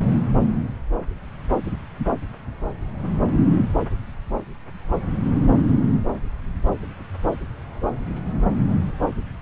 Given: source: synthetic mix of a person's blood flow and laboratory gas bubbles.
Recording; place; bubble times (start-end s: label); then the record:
Doppler ultrasound of blood flow; subclavian vein
no bubbles
From the record:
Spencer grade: 0 (complete lack of bubble signals)